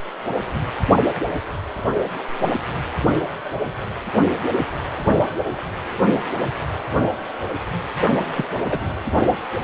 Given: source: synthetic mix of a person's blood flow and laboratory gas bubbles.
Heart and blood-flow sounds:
Doppler ultrasound of blood flow; precordium
8.34-8.46 s: bubbles
8.70-8.79 s: bubbles
From the record:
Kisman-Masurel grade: 122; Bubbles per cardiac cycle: 1 to 2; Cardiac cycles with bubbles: 10 to 50%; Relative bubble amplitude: moderate (0.250 to 0.450); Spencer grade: 2 (many but less than half of the cardiac periods contain bubble signals, singularly or in groups); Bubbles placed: only in the low amplitude regions of the cardiac cycle

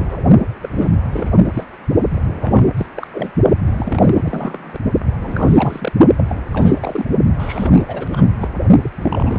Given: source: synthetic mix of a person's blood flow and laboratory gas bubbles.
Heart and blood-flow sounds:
Doppler ultrasound of blood flow; precordium
0.00-0.21 s: bubbles
0.62-0.69 s: bubbles
0.77-0.97 s: bubbles
1.12-1.31 s: bubbles
1.44-1.50 s: bubbles
1.54-1.64 s: bubbles
2.09-2.73 s: bubbles
2.76-2.86 s: bubbles
2.96-3.07 s: bubbles
3.12-3.30 s: bubbles
3.66-3.72 s: bubbles
3.76-4.79 s: bubbles
5.21-5.92 s: bubbles
6.17-6.46 s: bubbles
6.52-7.05 s: bubbles
7.38-7.82 s: bubbles
7.88-8.25 s: bubbles
8.41-8.49 s: bubbles
8.82-8.90 s: bubbles
9.01-9.39 s: bubbles
From the record:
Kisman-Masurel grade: 332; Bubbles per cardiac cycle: rolling drumbeat, 9 or more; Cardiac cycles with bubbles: 50 to 99%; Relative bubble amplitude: moderate (0.250 to 0.450); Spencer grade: 3 (all of the cardiac periods contain showers or single bubble signals, but not dominating or overriding the cardiac motion signals); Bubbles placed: only in the low amplitude regions of the cardiac cycle

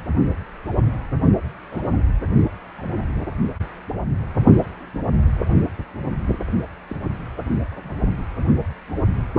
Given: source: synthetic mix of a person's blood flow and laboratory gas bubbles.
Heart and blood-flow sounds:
Doppler ultrasound of blood flow; precordium
1.71-1.82 s: bubbles
2.75-3.06 s: bubbles
6.88-6.96 s: bubbles
7.83-7.93 s: bubbles
From the record:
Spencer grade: 2 (many but less than half of the cardiac periods contain bubble signals, singularly or in groups); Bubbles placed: only in the low amplitude regions of the cardiac cycle

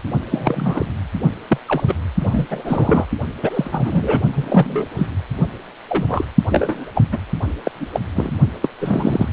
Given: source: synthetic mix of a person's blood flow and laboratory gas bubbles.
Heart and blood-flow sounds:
Doppler ultrasound of blood flow; precordium
0.30-0.86 s: bubbles
1.48-1.58 s: bubbles
1.67-1.83 s: bubbles
1.88-1.95 s: bubbles
2.19-2.46 s: bubbles
2.50-2.62 s: bubbles
2.65-3.05 s: bubbles
3.42-4.22 s: bubbles
4.33-4.86 s: bubbles
4.96-5.07 s: bubbles
5.89-6.25 s: bubbles
6.50-6.85 s: bubbles
6.95-7.03 s: bubbles
7.12-7.19 s: bubbles
7.64-7.71 s: bubbles
7.80-7.87 s: bubbles
7.92-8.00 s: bubbles
8.15-8.31 s: bubbles
8.62-8.69 s: bubbles
8.80-9.29 s: bubbles
From the record:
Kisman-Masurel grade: 232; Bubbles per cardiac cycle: several, 3 to 8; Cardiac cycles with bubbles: 50 to 99%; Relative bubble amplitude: moderate (0.250 to 0.450); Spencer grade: 3 (all of the cardiac periods contain showers or single bubble signals, but not dominating or overriding the cardiac motion signals); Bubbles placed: only in the low amplitude regions of the cardiac cycle

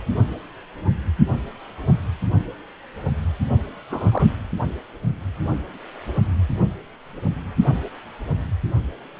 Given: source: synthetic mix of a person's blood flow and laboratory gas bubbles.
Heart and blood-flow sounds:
Doppler ultrasound of blood flow; precordium
3.90-4.28 s: bubbles
From the record:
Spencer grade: 2 (many but less than half of the cardiac periods contain bubble signals, singularly or in groups); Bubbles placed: only in the low amplitude regions of the cardiac cycle

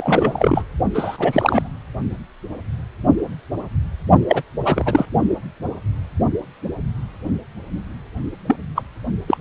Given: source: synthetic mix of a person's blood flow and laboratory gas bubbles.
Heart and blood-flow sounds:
Doppler ultrasound of blood flow; precordium
0.00-0.65 s: bubbles
0.94-1.69 s: bubbles
4.29-4.42 s: bubbles
4.64-5.05 s: bubbles
8.48-8.56 s: bubbles
8.76-8.82 s: bubbles
9.28-9.38 s: bubbles
From the record:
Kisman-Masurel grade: 333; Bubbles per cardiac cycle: rolling drumbeat, 9 or more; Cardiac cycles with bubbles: 50 to 99%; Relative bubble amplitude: loud (0.450 to 0.775); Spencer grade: 3 (all of the cardiac periods contain showers or single bubble signals, but not dominating or overriding the cardiac motion signals); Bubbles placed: only in the low amplitude regions of the cardiac cycle

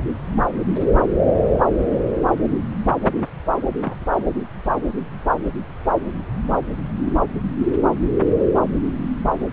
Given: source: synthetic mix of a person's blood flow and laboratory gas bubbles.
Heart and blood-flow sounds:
Doppler ultrasound of blood flow; subclavian vein
3.82-3.96 s: bubbles
4.13-4.33 s: bubbles
From the record:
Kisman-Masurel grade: 111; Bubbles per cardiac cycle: 1 to 2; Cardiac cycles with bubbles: 1 to 10%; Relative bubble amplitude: barely perceptible (0.100 to 0.250); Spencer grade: 1 (occasional bubble signal discernible with the cardiac motion signal, with majority of cardiac periods free of bubbles); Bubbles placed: anywhere in the cardiac cycle

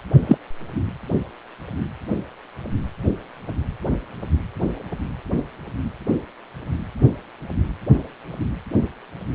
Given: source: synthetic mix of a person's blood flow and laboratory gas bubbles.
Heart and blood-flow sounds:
Doppler ultrasound of blood flow; precordium
0.26-0.38 s: bubbles
From the record:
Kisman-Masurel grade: 113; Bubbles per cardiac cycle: 1 to 2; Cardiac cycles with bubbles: 1 to 10%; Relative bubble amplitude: loud (0.450 to 0.775); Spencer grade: 1 (occasional bubble signal discernible with the cardiac motion signal, with majority of cardiac periods free of bubbles); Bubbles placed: anywhere in the cardiac cycle

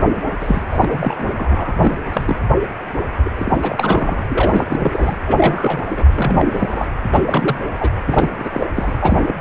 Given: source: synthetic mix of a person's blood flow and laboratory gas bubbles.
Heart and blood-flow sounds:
Doppler ultrasound of blood flow; precordium
0.39-1.31 s: bubbles
1.35-1.77 s: bubbles
1.81-1.99 s: bubbles
2.12-2.42 s: bubbles
3.24-3.33 s: bubbles
3.38-4.25 s: bubbles
4.28-5.16 s: bubbles
5.26-6.04 s: bubbles
6.11-6.87 s: bubbles
7.12-7.59 s: bubbles
7.77-7.90 s: bubbles
8.05-8.67 s: bubbles
8.75-8.92 s: bubbles
9.01-9.34 s: bubbles
9.38-9.41 s: bubbles
From the record:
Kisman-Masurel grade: 342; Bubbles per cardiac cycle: rolling drumbeat, 9 or more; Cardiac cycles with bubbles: 100%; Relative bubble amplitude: moderate (0.250 to 0.450); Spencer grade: 3 (all of the cardiac periods contain showers or single bubble signals, but not dominating or overriding the cardiac motion signals); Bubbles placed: anywhere in the cardiac cycle

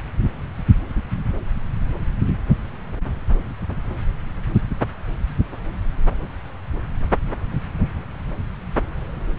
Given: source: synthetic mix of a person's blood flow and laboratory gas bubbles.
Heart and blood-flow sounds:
Doppler ultrasound of blood flow; subclavian vein
no bubbles
From the record:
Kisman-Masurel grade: 000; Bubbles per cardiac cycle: 0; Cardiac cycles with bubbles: 0%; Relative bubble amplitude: no bubbles discernible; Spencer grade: 0 (complete lack of bubble signals)

